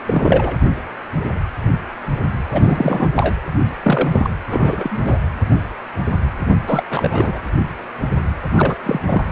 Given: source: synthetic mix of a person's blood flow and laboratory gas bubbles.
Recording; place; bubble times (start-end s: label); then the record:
Doppler ultrasound of blood flow; precordium
0.06-0.59 s: bubbles
2.50-3.11 s: bubbles
3.15-3.33 s: bubbles
3.83-4.30 s: bubbles
4.48-5.17 s: bubbles
6.67-6.83 s: bubbles
6.90-7.38 s: bubbles
8.54-8.75 s: bubbles
8.83-9.00 s: bubbles
9.06-9.22 s: bubbles
From the record:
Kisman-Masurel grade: 333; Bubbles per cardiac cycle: rolling drumbeat, 9 or more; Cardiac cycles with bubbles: 50 to 99%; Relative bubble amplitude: loud (0.450 to 0.775); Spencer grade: 3 (all of the cardiac periods contain showers or single bubble signals, but not dominating or overriding the cardiac motion signals); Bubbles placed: anywhere in the cardiac cycle